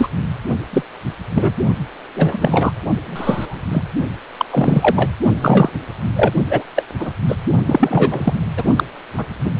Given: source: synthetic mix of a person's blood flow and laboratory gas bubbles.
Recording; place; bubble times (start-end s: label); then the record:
Doppler ultrasound of blood flow; precordium
0.00-0.08 s: bubbles
0.72-0.83 s: bubbles
1.29-1.52 s: bubbles
2.15-2.72 s: bubbles
3.06-3.61 s: bubbles
3.71-3.82 s: bubbles
4.38-4.46 s: bubbles
4.50-5.10 s: bubbles
5.42-5.70 s: bubbles
6.16-6.33 s: bubbles
6.50-6.63 s: bubbles
6.75-6.83 s: bubbles
6.99-7.12 s: bubbles
7.28-7.36 s: bubbles
7.67-8.34 s: bubbles
8.57-8.63 s: bubbles
8.76-8.84 s: bubbles
9.17-9.26 s: bubbles
9.44-9.53 s: bubbles
From the record:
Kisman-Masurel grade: 243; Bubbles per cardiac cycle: several, 3 to 8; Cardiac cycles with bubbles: 100%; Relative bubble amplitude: loud (0.450 to 0.775); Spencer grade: 3 (all of the cardiac periods contain showers or single bubble signals, but not dominating or overriding the cardiac motion signals); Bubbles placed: only in the low amplitude regions of the cardiac cycle